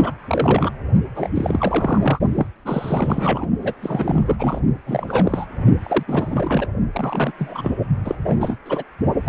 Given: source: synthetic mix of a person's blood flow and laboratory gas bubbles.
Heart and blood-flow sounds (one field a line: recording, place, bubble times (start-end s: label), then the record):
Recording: Doppler ultrasound of blood flow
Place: precordium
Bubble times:
0.00-0.11 s: bubbles
0.20-0.70 s: bubbles
1.15-1.29 s: bubbles
1.34-2.20 s: bubbles
2.35-2.47 s: bubbles
2.65-3.47 s: bubbles
3.62-3.74 s: bubbles
3.81-4.36 s: bubbles
4.38-4.61 s: bubbles
4.86-5.46 s: bubbles
5.83-6.03 s: bubbles
6.08-6.67 s: bubbles
6.92-7.32 s: bubbles
7.38-7.75 s: bubbles
8.04-8.15 s: bubbles
8.19-8.56 s: bubbles
8.65-8.83 s: bubbles
9.25-9.29 s: bubbles
From the record:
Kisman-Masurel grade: 342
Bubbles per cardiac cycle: rolling drumbeat, 9 or more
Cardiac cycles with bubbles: 100%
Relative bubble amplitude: moderate (0.250 to 0.450)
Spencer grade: 3 (all of the cardiac periods contain showers or single bubble signals, but not dominating or overriding the cardiac motion signals)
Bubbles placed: only in the low amplitude regions of the cardiac cycle